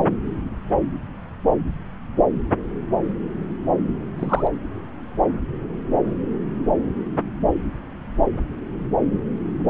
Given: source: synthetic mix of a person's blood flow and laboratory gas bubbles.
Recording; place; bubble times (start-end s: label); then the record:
Doppler ultrasound of blood flow; subclavian vein
4.18-4.47 s: bubbles
From the record:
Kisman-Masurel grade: 113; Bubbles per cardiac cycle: 1 to 2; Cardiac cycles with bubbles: 1 to 10%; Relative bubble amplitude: loud (0.450 to 0.775); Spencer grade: 1 (occasional bubble signal discernible with the cardiac motion signal, with majority of cardiac periods free of bubbles); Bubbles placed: anywhere in the cardiac cycle